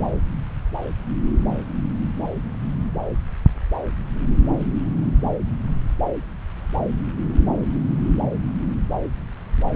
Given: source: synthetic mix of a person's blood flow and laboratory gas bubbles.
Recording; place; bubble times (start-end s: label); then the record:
Doppler ultrasound of blood flow; subclavian vein
no bubbles
From the record:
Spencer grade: 0 (complete lack of bubble signals)